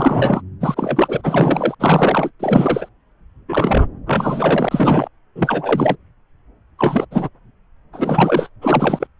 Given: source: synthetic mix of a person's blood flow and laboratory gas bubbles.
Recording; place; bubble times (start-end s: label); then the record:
Doppler ultrasound of blood flow; subclavian vein
0.00-0.41 s: bubbles
0.60-1.75 s: bubbles
1.79-2.31 s: bubbles
2.40-2.89 s: bubbles
3.48-3.88 s: bubbles
4.06-5.08 s: bubbles
5.35-5.96 s: bubbles
6.79-7.05 s: bubbles
7.11-7.29 s: bubbles
7.93-8.48 s: bubbles
8.62-9.07 s: bubbles
From the record:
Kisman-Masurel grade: 333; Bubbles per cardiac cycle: rolling drumbeat, 9 or more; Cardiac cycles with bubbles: 50 to 99%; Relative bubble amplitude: loud (0.450 to 0.775); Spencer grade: 3 (all of the cardiac periods contain showers or single bubble signals, but not dominating or overriding the cardiac motion signals); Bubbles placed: anywhere in the cardiac cycle